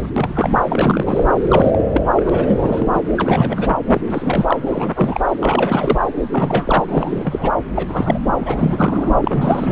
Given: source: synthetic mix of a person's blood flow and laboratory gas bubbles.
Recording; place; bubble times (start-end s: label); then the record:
Doppler ultrasound of blood flow; subclavian vein
0.00-0.11 s: bubbles
0.16-0.50 s: bubbles
0.67-1.23 s: bubbles
1.49-1.87 s: bubbles
1.94-2.02 s: bubbles
2.15-3.03 s: bubbles
3.09-3.71 s: bubbles
3.86-4.01 s: bubbles
4.10-4.58 s: bubbles
4.66-5.21 s: bubbles
5.41-5.99 s: bubbles
6.31-7.51 s: bubbles
7.75-8.19 s: bubbles
8.38-9.12 s: bubbles
9.21-9.72 s: bubbles
From the record:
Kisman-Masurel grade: 342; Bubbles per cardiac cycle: rolling drumbeat, 9 or more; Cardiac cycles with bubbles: 100%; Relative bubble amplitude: moderate (0.250 to 0.450); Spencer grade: 3 (all of the cardiac periods contain showers or single bubble signals, but not dominating or overriding the cardiac motion signals); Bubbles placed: anywhere in the cardiac cycle